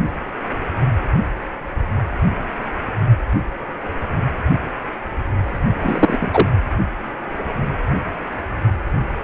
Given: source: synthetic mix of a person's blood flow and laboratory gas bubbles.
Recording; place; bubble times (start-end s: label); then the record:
Doppler ultrasound of blood flow; precordium
5.81-6.48 s: bubbles
From the record:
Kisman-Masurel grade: 223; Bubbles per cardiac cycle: several, 3 to 8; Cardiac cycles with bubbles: 10 to 50%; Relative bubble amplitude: loud (0.450 to 0.775); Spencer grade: 2 (many but less than half of the cardiac periods contain bubble signals, singularly or in groups); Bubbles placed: anywhere in the cardiac cycle